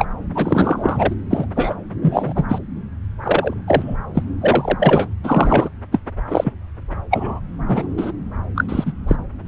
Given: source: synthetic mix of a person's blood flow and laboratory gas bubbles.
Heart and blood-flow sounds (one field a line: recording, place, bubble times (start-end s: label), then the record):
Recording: Doppler ultrasound of blood flow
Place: subclavian vein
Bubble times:
0.00-0.05 s: bubbles
0.35-1.15 s: bubbles
1.30-1.45 s: bubbles
1.55-1.75 s: bubbles
2.02-2.44 s: bubbles
2.48-2.58 s: bubbles
3.23-3.54 s: bubbles
3.67-3.96 s: bubbles
4.14-4.23 s: bubbles
4.41-4.77 s: bubbles
4.80-5.08 s: bubbles
5.24-5.70 s: bubbles
5.92-6.00 s: bubbles
6.30-6.53 s: bubbles
7.11-7.40 s: bubbles
7.67-7.88 s: bubbles
7.97-8.12 s: bubbles
8.55-8.64 s: bubbles
8.68-8.92 s: bubbles
9.07-9.16 s: bubbles
9.45-9.48 s: bubbles
From the record:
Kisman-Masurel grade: 243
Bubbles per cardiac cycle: several, 3 to 8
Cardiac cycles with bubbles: 100%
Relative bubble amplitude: loud (0.450 to 0.775)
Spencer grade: 3 (all of the cardiac periods contain showers or single bubble signals, but not dominating or overriding the cardiac motion signals)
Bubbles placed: anywhere in the cardiac cycle